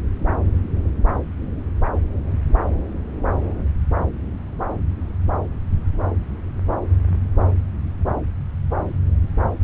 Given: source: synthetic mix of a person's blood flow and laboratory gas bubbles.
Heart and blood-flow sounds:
Doppler ultrasound of blood flow; subclavian vein
no bubbles
From the record:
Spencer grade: 0 (complete lack of bubble signals)

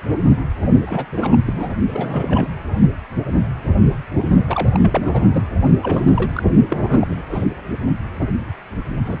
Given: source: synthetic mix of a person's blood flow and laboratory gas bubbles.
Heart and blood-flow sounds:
Doppler ultrasound of blood flow; precordium
0.86-1.06 s: bubbles
1.12-1.37 s: bubbles
1.46-1.74 s: bubbles
1.88-2.48 s: bubbles
4.47-5.46 s: bubbles
5.83-6.31 s: bubbles
6.35-6.43 s: bubbles
6.69-6.77 s: bubbles
6.83-7.17 s: bubbles
7.31-7.45 s: bubbles
9.05-9.20 s: bubbles
From the record:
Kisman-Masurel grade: 332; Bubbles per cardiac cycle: rolling drumbeat, 9 or more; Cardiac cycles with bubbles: 50 to 99%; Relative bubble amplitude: moderate (0.250 to 0.450); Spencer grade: 3 (all of the cardiac periods contain showers or single bubble signals, but not dominating or overriding the cardiac motion signals); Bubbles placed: only in the low amplitude regions of the cardiac cycle

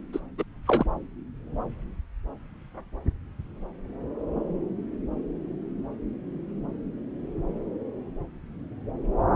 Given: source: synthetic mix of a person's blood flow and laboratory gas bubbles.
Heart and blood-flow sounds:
Doppler ultrasound of blood flow; subclavian vein
0.13-0.20 s: bubbles
0.38-0.44 s: bubbles
0.67-0.85 s: bubbles
From the record:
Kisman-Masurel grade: 212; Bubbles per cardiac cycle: several, 3 to 8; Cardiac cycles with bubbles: 1 to 10%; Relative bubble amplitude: moderate (0.250 to 0.450); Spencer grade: 1 (occasional bubble signal discernible with the cardiac motion signal, with majority of cardiac periods free of bubbles); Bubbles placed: anywhere in the cardiac cycle

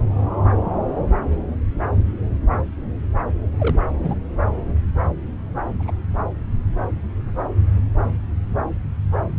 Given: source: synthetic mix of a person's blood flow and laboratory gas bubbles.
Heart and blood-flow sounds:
Doppler ultrasound of blood flow; subclavian vein
3.59-3.79 s: bubbles
4.02-4.15 s: bubbles
5.79-5.91 s: bubbles
From the record:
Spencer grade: 2 (many but less than half of the cardiac periods contain bubble signals, singularly or in groups); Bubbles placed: anywhere in the cardiac cycle

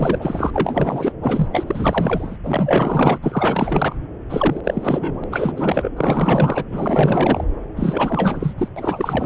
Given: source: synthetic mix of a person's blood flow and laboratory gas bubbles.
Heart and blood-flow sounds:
Doppler ultrasound of blood flow; subclavian vein
0.00-0.51 s: bubbles
0.53-1.12 s: bubbles
1.21-1.48 s: bubbles
1.52-1.63 s: bubbles
1.67-2.37 s: bubbles
2.43-3.19 s: bubbles
3.21-3.96 s: bubbles
4.29-4.61 s: bubbles
4.64-5.24 s: bubbles
5.30-5.53 s: bubbles
5.56-5.90 s: bubbles
5.96-6.64 s: bubbles
6.72-7.44 s: bubbles
7.76-8.54 s: bubbles
8.57-8.68 s: bubbles
8.76-9.25 s: bubbles
From the record:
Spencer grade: 4 (maximum detectable bubble signal sounding continuously throughout systole and diastole of every cardiac period, and overriding the amplitude of the normal cardiac signals); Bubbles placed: anywhere in the cardiac cycle

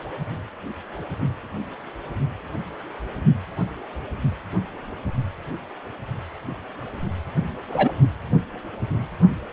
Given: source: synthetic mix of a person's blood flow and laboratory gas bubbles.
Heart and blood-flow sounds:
Doppler ultrasound of blood flow; precordium
7.68-7.93 s: bubbles
From the record:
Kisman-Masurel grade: 212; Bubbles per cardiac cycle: several, 3 to 8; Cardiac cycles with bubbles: 1 to 10%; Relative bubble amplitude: moderate (0.250 to 0.450); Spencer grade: 1 (occasional bubble signal discernible with the cardiac motion signal, with majority of cardiac periods free of bubbles); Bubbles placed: only in the low amplitude regions of the cardiac cycle

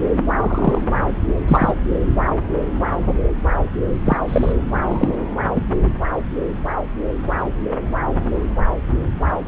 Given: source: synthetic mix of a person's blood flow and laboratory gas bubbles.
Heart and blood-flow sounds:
Doppler ultrasound of blood flow; subclavian vein
0.41-0.82 s: bubbles
1.47-1.73 s: bubbles
4.05-4.17 s: bubbles
4.28-4.52 s: bubbles
4.88-5.15 s: bubbles
5.55-5.64 s: bubbles
From the record:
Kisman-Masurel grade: 123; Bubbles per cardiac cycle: 1 to 2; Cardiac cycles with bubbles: 10 to 50%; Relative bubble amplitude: loud (0.450 to 0.775); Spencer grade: 2 (many but less than half of the cardiac periods contain bubble signals, singularly or in groups); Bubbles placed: anywhere in the cardiac cycle

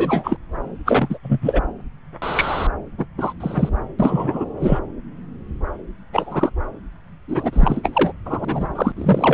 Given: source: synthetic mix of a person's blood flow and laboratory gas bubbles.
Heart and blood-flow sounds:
Doppler ultrasound of blood flow; subclavian vein
0.00-0.37 s: bubbles
0.85-1.18 s: bubbles
1.23-1.39 s: bubbles
1.42-1.61 s: bubbles
2.22-2.67 s: bubbles
2.98-3.05 s: bubbles
3.17-3.33 s: bubbles
3.40-3.69 s: bubbles
3.98-4.45 s: bubbles
4.59-4.79 s: bubbles
6.12-6.50 s: bubbles
7.28-8.12 s: bubbles
8.25-8.68 s: bubbles
8.75-8.92 s: bubbles
8.96-9.34 s: bubbles
From the record:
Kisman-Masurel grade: 243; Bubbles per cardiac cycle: several, 3 to 8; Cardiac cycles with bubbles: 100%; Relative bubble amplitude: loud (0.450 to 0.775); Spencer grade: 3 (all of the cardiac periods contain showers or single bubble signals, but not dominating or overriding the cardiac motion signals); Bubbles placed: anywhere in the cardiac cycle

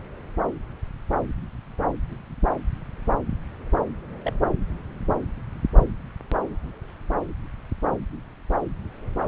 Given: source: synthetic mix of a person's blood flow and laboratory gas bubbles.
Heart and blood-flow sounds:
Doppler ultrasound of blood flow; subclavian vein
4.25-4.33 s: bubbles
From the record:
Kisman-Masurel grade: 111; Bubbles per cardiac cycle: 1 to 2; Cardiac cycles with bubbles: 1 to 10%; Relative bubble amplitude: barely perceptible (0.100 to 0.250); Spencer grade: 1 (occasional bubble signal discernible with the cardiac motion signal, with majority of cardiac periods free of bubbles); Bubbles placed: anywhere in the cardiac cycle

